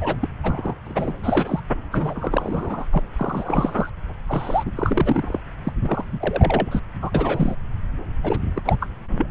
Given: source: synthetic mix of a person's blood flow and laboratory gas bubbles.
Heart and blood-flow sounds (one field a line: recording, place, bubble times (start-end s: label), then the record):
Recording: Doppler ultrasound of blood flow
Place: subclavian vein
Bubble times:
0.00-0.16 s: bubbles
0.21-0.28 s: bubbles
0.43-0.75 s: bubbles
0.86-1.13 s: bubbles
1.22-1.62 s: bubbles
1.92-2.85 s: bubbles
2.90-3.00 s: bubbles
3.16-3.89 s: bubbles
4.26-4.71 s: bubbles
4.75-5.40 s: bubbles
5.63-5.72 s: bubbles
5.81-6.04 s: bubbles
6.12-6.79 s: bubbles
7.01-7.10 s: bubbles
7.14-7.55 s: bubbles
8.22-8.39 s: bubbles
8.55-8.62 s: bubbles
8.64-8.76 s: bubbles
8.80-8.88 s: bubbles
9.17-9.27 s: bubbles
From the record:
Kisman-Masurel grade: 343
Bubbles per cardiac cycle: rolling drumbeat, 9 or more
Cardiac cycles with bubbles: 100%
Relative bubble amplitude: loud (0.450 to 0.775)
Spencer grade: 3 (all of the cardiac periods contain showers or single bubble signals, but not dominating or overriding the cardiac motion signals)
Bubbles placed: anywhere in the cardiac cycle